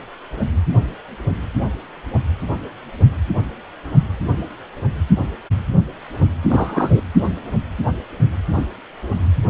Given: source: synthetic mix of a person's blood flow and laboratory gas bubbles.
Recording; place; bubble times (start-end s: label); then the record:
Doppler ultrasound of blood flow; precordium
6.42-7.02 s: bubbles
From the record:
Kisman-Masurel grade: 212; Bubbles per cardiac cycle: several, 3 to 8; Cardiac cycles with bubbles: 1 to 10%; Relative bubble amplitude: moderate (0.250 to 0.450); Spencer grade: 1 (occasional bubble signal discernible with the cardiac motion signal, with majority of cardiac periods free of bubbles); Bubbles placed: only in the low amplitude regions of the cardiac cycle